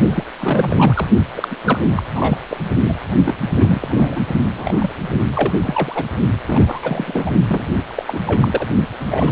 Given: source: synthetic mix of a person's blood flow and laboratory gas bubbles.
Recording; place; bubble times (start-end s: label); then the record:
Doppler ultrasound of blood flow; precordium
0.00-0.24 s: bubbles
0.41-1.07 s: bubbles
1.34-1.48 s: bubbles
1.51-1.56 s: bubbles
1.64-1.79 s: bubbles
1.96-2.03 s: bubbles
2.11-2.38 s: bubbles
2.48-2.57 s: bubbles
2.82-2.94 s: bubbles
3.25-3.35 s: bubbles
3.60-4.21 s: bubbles
4.55-4.90 s: bubbles
4.97-5.21 s: bubbles
5.33-5.58 s: bubbles
5.63-6.04 s: bubbles
6.46-7.31 s: bubbles
7.48-7.64 s: bubbles
7.73-7.85 s: bubbles
7.96-8.23 s: bubbles
8.26-8.67 s: bubbles
9.00-9.31 s: bubbles
From the record:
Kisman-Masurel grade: 342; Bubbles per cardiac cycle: rolling drumbeat, 9 or more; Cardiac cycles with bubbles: 100%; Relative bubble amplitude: moderate (0.250 to 0.450); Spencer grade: 3 (all of the cardiac periods contain showers or single bubble signals, but not dominating or overriding the cardiac motion signals); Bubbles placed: only in the low amplitude regions of the cardiac cycle